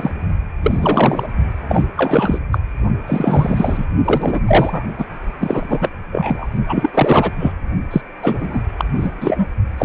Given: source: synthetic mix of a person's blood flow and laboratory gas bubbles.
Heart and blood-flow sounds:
Doppler ultrasound of blood flow; precordium
0.00-0.11 s: bubbles
0.62-1.28 s: bubbles
1.68-1.85 s: bubbles
1.97-2.39 s: bubbles
2.52-2.58 s: bubbles
3.07-3.86 s: bubbles
4.04-4.40 s: bubbles
4.47-4.86 s: bubbles
4.97-5.05 s: bubbles
5.40-5.89 s: bubbles
6.11-6.48 s: bubbles
6.67-6.90 s: bubbles
6.94-7.31 s: bubbles
7.39-7.52 s: bubbles
7.90-8.01 s: bubbles
8.22-8.61 s: bubbles
8.78-8.85 s: bubbles
8.96-9.14 s: bubbles
9.21-9.47 s: bubbles
9.78-9.85 s: bubbles
From the record:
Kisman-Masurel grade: 343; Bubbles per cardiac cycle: rolling drumbeat, 9 or more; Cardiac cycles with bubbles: 100%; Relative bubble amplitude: loud (0.450 to 0.775); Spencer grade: 3 (all of the cardiac periods contain showers or single bubble signals, but not dominating or overriding the cardiac motion signals); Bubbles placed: only in the low amplitude regions of the cardiac cycle

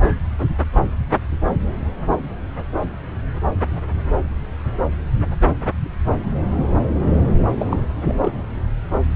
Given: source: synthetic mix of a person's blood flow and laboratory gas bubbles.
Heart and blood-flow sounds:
Doppler ultrasound of blood flow; subclavian vein
7.60-7.77 s: bubbles
8.08-8.31 s: bubbles
From the record:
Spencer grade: 1 (occasional bubble signal discernible with the cardiac motion signal, with majority of cardiac periods free of bubbles); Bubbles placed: anywhere in the cardiac cycle

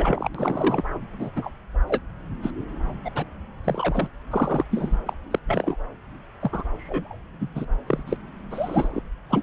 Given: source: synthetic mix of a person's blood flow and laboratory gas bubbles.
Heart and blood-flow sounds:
Doppler ultrasound of blood flow; subclavian vein
0.00-0.29 s: bubbles
0.34-0.83 s: bubbles
1.20-1.30 s: bubbles
1.35-1.50 s: bubbles
1.87-1.98 s: bubbles
2.42-2.50 s: bubbles
3.04-3.10 s: bubbles
3.15-3.25 s: bubbles
3.64-4.08 s: bubbles
4.30-4.63 s: bubbles
4.71-4.97 s: bubbles
5.06-5.13 s: bubbles
5.30-5.39 s: bubbles
5.47-5.77 s: bubbles
6.41-6.64 s: bubbles
6.78-7.16 s: bubbles
7.40-7.47 s: bubbles
7.55-7.65 s: bubbles
7.87-8.03 s: bubbles
8.06-8.17 s: bubbles
8.50-9.00 s: bubbles
9.29-9.43 s: bubbles
From the record:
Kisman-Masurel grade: 242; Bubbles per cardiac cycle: several, 3 to 8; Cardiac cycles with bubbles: 100%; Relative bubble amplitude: moderate (0.250 to 0.450); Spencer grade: 3 (all of the cardiac periods contain showers or single bubble signals, but not dominating or overriding the cardiac motion signals); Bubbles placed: anywhere in the cardiac cycle

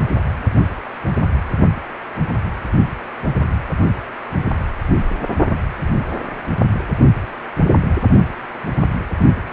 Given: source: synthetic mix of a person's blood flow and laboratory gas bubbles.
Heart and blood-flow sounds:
Doppler ultrasound of blood flow; precordium
9.51-9.53 s: bubbles
From the record:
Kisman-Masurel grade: 111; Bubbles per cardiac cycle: 1 to 2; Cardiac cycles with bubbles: 1 to 10%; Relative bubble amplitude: barely perceptible (0.100 to 0.250); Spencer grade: 1 (occasional bubble signal discernible with the cardiac motion signal, with majority of cardiac periods free of bubbles); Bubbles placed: only in the low amplitude regions of the cardiac cycle

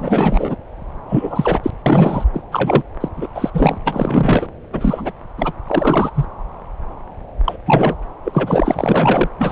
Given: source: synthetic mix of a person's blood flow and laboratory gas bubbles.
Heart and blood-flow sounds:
Doppler ultrasound of blood flow; subclavian vein
0.00-0.56 s: bubbles
1.08-1.60 s: bubbles
1.63-1.70 s: bubbles
1.86-2.24 s: bubbles
2.33-2.42 s: bubbles
2.51-2.82 s: bubbles
3.00-3.08 s: bubbles
3.17-3.28 s: bubbles
3.34-3.50 s: bubbles
3.53-3.78 s: bubbles
3.84-4.47 s: bubbles
4.72-5.12 s: bubbles
5.37-5.54 s: bubbles
5.67-6.25 s: bubbles
7.44-7.57 s: bubbles
7.67-7.96 s: bubbles
8.24-9.28 s: bubbles
9.39-9.52 s: bubbles
From the record:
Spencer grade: 3 (all of the cardiac periods contain showers or single bubble signals, but not dominating or overriding the cardiac motion signals); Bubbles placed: anywhere in the cardiac cycle

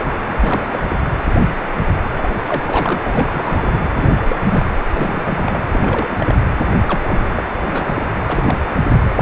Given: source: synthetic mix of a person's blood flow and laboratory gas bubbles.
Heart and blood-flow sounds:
Doppler ultrasound of blood flow; precordium
0.00-0.12 s: bubbles
0.27-0.79 s: bubbles
0.88-0.96 s: bubbles
2.12-2.31 s: bubbles
2.46-3.00 s: bubbles
3.03-3.79 s: bubbles
3.95-4.36 s: bubbles
4.40-4.68 s: bubbles
4.94-5.60 s: bubbles
5.72-6.16 s: bubbles
6.19-6.40 s: bubbles
6.88-7.01 s: bubbles
7.08-7.29 s: bubbles
7.35-7.44 s: bubbles
7.66-7.91 s: bubbles
7.96-8.03 s: bubbles
8.24-8.59 s: bubbles
9.08-9.22 s: bubbles
From the record:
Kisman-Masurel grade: 332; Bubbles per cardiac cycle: rolling drumbeat, 9 or more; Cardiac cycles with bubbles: 50 to 99%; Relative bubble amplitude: moderate (0.250 to 0.450); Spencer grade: 3 (all of the cardiac periods contain showers or single bubble signals, but not dominating or overriding the cardiac motion signals); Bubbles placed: anywhere in the cardiac cycle

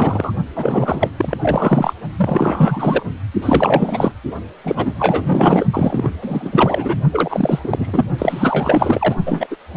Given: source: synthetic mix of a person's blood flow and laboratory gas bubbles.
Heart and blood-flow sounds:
Doppler ultrasound of blood flow; precordium
0.00-0.32 s: bubbles
0.55-1.09 s: bubbles
1.17-1.37 s: bubbles
1.42-1.94 s: bubbles
2.17-3.04 s: bubbles
3.42-4.12 s: bubbles
4.64-5.65 s: bubbles
5.72-6.08 s: bubbles
6.21-7.01 s: bubbles
7.12-7.59 s: bubbles
7.63-8.05 s: bubbles
8.18-9.15 s: bubbles
9.26-9.47 s: bubbles
9.50-9.56 s: bubbles
9.72-9.77 s: bubbles
From the record:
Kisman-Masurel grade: 444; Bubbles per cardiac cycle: continuous sound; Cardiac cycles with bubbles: 100%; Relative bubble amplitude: maximal (0.775 to 0.999); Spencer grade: 4 (maximum detectable bubble signal sounding continuously throughout systole and diastole of every cardiac period, and overriding the amplitude of the normal cardiac signals); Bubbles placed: only in the low amplitude regions of the cardiac cycle

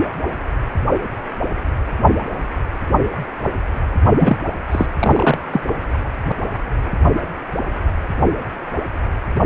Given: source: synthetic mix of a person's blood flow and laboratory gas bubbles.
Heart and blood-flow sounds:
Doppler ultrasound of blood flow; precordium
4.19-4.37 s: bubbles
4.71-4.87 s: bubbles
4.99-5.39 s: bubbles
5.52-5.61 s: bubbles
From the record:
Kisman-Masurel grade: 213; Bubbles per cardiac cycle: several, 3 to 8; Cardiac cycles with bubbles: 1 to 10%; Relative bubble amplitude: loud (0.450 to 0.775); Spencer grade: 1 (occasional bubble signal discernible with the cardiac motion signal, with majority of cardiac periods free of bubbles); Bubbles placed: only in the low amplitude regions of the cardiac cycle

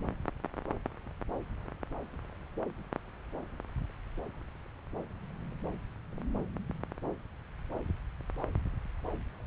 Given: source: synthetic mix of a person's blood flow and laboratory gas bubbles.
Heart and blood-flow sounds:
Doppler ultrasound of blood flow; subclavian vein
no bubbles
From the record:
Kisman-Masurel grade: 000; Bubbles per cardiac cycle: 0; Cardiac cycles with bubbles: 0%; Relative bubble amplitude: no bubbles discernible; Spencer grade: 0 (complete lack of bubble signals)

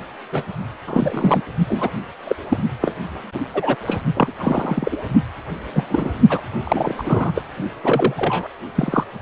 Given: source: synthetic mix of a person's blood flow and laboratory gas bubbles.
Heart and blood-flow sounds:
Doppler ultrasound of blood flow; precordium
0.32-0.43 s: bubbles
0.86-1.43 s: bubbles
1.68-1.91 s: bubbles
2.27-2.36 s: bubbles
2.49-2.57 s: bubbles
2.81-2.96 s: bubbles
3.34-3.40 s: bubbles
3.54-3.75 s: bubbles
3.87-4.01 s: bubbles
4.14-4.32 s: bubbles
4.38-4.97 s: bubbles
5.73-5.84 s: bubbles
5.89-6.12 s: bubbles
6.29-6.41 s: bubbles
6.63-6.94 s: bubbles
6.98-7.42 s: bubbles
7.84-8.13 s: bubbles
8.17-8.48 s: bubbles
8.75-9.04 s: bubbles
From the record:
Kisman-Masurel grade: 242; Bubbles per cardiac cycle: several, 3 to 8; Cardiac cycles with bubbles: 100%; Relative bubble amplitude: moderate (0.250 to 0.450); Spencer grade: 3 (all of the cardiac periods contain showers or single bubble signals, but not dominating or overriding the cardiac motion signals); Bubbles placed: only in the low amplitude regions of the cardiac cycle

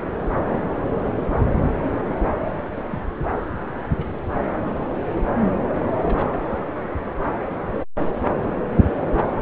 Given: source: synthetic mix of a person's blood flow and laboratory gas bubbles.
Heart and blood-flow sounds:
Doppler ultrasound of blood flow; subclavian vein
0.49-0.59 s: bubbles
2.90-2.99 s: bubbles
3.97-4.06 s: bubbles
6.01-6.28 s: bubbles
From the record:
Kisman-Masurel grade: 121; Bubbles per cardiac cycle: 1 to 2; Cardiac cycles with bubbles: 10 to 50%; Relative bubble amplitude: barely perceptible (0.100 to 0.250); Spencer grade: 2 (many but less than half of the cardiac periods contain bubble signals, singularly or in groups); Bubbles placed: anywhere in the cardiac cycle

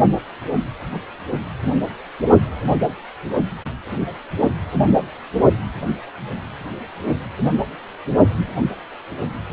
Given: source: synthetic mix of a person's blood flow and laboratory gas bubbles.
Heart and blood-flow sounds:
Doppler ultrasound of blood flow; precordium
0.92-0.99 s: bubbles
From the record:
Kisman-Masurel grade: 111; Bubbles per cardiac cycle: 1 to 2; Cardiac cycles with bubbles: 1 to 10%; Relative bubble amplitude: barely perceptible (0.100 to 0.250); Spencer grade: 1 (occasional bubble signal discernible with the cardiac motion signal, with majority of cardiac periods free of bubbles); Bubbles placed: only in the low amplitude regions of the cardiac cycle

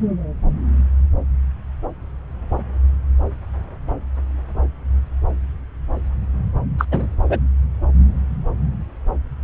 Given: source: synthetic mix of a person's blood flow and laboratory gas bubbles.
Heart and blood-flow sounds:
Doppler ultrasound of blood flow; subclavian vein
6.78-6.84 s: bubbles
6.91-7.06 s: bubbles
7.29-7.39 s: bubbles
From the record:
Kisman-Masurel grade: 213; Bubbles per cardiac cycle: several, 3 to 8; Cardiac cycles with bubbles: 1 to 10%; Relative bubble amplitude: loud (0.450 to 0.775); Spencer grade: 1 (occasional bubble signal discernible with the cardiac motion signal, with majority of cardiac periods free of bubbles); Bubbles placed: anywhere in the cardiac cycle

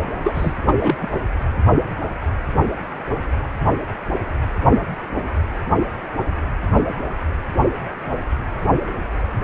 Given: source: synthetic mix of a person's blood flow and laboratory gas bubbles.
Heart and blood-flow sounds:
Doppler ultrasound of blood flow; precordium
0.24-0.53 s: bubbles
0.68-0.74 s: bubbles
0.81-0.96 s: bubbles
0.99-1.08 s: bubbles
From the record:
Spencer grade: 1 (occasional bubble signal discernible with the cardiac motion signal, with majority of cardiac periods free of bubbles); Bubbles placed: only in the low amplitude regions of the cardiac cycle

